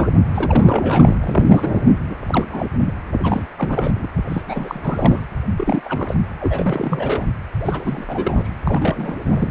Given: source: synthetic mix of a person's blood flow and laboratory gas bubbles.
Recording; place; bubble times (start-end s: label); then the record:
Doppler ultrasound of blood flow; precordium
0.00-0.12 s: bubbles
0.34-1.16 s: bubbles
1.22-1.82 s: bubbles
2.09-2.17 s: bubbles
2.27-2.67 s: bubbles
2.76-2.93 s: bubbles
3.19-3.47 s: bubbles
3.57-4.08 s: bubbles
4.29-4.42 s: bubbles
4.47-5.26 s: bubbles
5.58-5.81 s: bubbles
5.84-6.15 s: bubbles
6.40-7.25 s: bubbles
7.64-8.04 s: bubbles
8.09-8.49 s: bubbles
8.64-9.17 s: bubbles
9.28-9.51 s: bubbles
From the record:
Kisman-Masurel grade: 342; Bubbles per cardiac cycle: rolling drumbeat, 9 or more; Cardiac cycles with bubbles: 100%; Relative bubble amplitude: moderate (0.250 to 0.450); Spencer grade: 3 (all of the cardiac periods contain showers or single bubble signals, but not dominating or overriding the cardiac motion signals); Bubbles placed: anywhere in the cardiac cycle